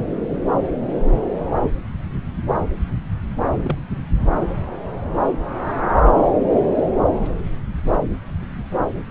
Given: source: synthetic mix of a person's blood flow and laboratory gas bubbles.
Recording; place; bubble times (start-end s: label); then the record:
Doppler ultrasound of blood flow; subclavian vein
3.62-3.76 s: bubbles
From the record:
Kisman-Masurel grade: 111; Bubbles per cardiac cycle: 1 to 2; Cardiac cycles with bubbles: 1 to 10%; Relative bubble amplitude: barely perceptible (0.100 to 0.250); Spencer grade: 1 (occasional bubble signal discernible with the cardiac motion signal, with majority of cardiac periods free of bubbles); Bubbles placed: anywhere in the cardiac cycle